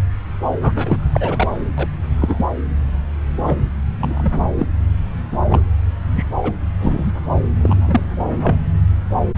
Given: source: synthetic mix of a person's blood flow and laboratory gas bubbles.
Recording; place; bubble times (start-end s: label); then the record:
Doppler ultrasound of blood flow; subclavian vein
0.62-1.05 s: bubbles
1.12-1.48 s: bubbles
1.78-1.88 s: bubbles
2.20-2.45 s: bubbles
3.46-3.63 s: bubbles
4.00-4.32 s: bubbles
4.58-4.66 s: bubbles
5.31-5.38 s: bubbles
5.49-5.65 s: bubbles
6.16-6.27 s: bubbles
6.42-6.52 s: bubbles
6.79-7.11 s: bubbles
7.56-8.00 s: bubbles
8.42-8.55 s: bubbles
From the record:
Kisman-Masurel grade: 232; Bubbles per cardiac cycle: several, 3 to 8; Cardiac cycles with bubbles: 50 to 99%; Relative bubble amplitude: moderate (0.250 to 0.450); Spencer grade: 3 (all of the cardiac periods contain showers or single bubble signals, but not dominating or overriding the cardiac motion signals); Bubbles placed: anywhere in the cardiac cycle